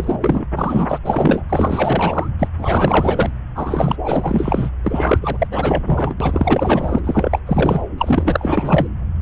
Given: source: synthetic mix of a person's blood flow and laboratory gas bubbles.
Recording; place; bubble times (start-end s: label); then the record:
Doppler ultrasound of blood flow; subclavian vein
0.00-0.18 s: bubbles
0.21-0.47 s: bubbles
0.56-0.98 s: bubbles
1.04-1.42 s: bubbles
1.49-2.31 s: bubbles
2.39-2.49 s: bubbles
2.58-3.31 s: bubbles
3.55-3.97 s: bubbles
4.04-4.71 s: bubbles
4.83-5.18 s: bubbles
5.21-5.47 s: bubbles
5.51-5.84 s: bubbles
5.86-6.15 s: bubbles
6.20-7.01 s: bubbles
7.04-7.39 s: bubbles
7.46-7.84 s: bubbles
7.98-8.88 s: bubbles
From the record:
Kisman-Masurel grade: 444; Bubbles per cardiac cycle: continuous sound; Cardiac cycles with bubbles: 100%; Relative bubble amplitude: maximal (0.775 to 0.999); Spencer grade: 4 (maximum detectable bubble signal sounding continuously throughout systole and diastole of every cardiac period, and overriding the amplitude of the normal cardiac signals); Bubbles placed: anywhere in the cardiac cycle